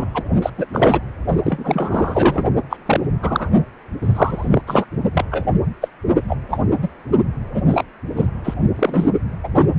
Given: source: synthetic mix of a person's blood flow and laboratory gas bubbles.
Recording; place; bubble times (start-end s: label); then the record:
Doppler ultrasound of blood flow; precordium
0.00-0.06 s: bubbles
0.14-0.23 s: bubbles
0.42-0.50 s: bubbles
0.57-0.66 s: bubbles
0.72-1.00 s: bubbles
1.44-2.44 s: bubbles
2.69-2.77 s: bubbles
2.85-3.00 s: bubbles
3.22-3.50 s: bubbles
4.02-4.62 s: bubbles
4.67-4.85 s: bubbles
5.14-5.25 s: bubbles
5.32-5.45 s: bubbles
5.81-5.88 s: bubbles
6.28-6.38 s: bubbles
6.49-6.58 s: bubbles
6.82-6.90 s: bubbles
7.54-7.62 s: bubbles
7.70-7.85 s: bubbles
8.16-8.29 s: bubbles
8.43-8.54 s: bubbles
8.75-9.13 s: bubbles
9.43-9.48 s: bubbles
9.55-9.67 s: bubbles
From the record:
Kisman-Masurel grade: 243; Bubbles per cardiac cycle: several, 3 to 8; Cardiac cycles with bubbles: 100%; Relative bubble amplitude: loud (0.450 to 0.775); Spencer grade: 3 (all of the cardiac periods contain showers or single bubble signals, but not dominating or overriding the cardiac motion signals); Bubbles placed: only in the low amplitude regions of the cardiac cycle